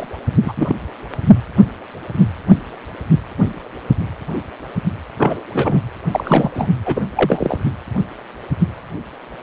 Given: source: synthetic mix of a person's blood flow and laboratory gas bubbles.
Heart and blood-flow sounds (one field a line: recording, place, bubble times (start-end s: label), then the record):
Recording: Doppler ultrasound of blood flow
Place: precordium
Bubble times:
0.00-0.07 s: bubbles
0.42-0.76 s: bubbles
5.18-5.42 s: bubbles
5.53-5.80 s: bubbles
6.11-6.51 s: bubbles
6.54-6.67 s: bubbles
6.85-7.02 s: bubbles
7.16-7.57 s: bubbles
From the record:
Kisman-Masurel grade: 223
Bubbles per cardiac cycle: several, 3 to 8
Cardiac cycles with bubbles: 10 to 50%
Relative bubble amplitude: loud (0.450 to 0.775)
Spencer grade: 2 (many but less than half of the cardiac periods contain bubble signals, singularly or in groups)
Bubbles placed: anywhere in the cardiac cycle